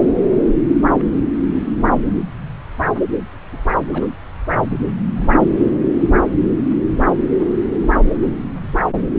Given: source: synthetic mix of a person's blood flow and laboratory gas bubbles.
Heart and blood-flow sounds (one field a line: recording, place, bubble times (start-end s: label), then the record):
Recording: Doppler ultrasound of blood flow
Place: subclavian vein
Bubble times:
0.92-1.08 s: bubbles
3.52-3.58 s: bubbles
3.92-4.17 s: bubbles
5.16-5.33 s: bubbles
From the record:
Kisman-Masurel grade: 121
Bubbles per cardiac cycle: 1 to 2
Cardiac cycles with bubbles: 10 to 50%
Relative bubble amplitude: barely perceptible (0.100 to 0.250)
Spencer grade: 2 (many but less than half of the cardiac periods contain bubble signals, singularly or in groups)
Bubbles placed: anywhere in the cardiac cycle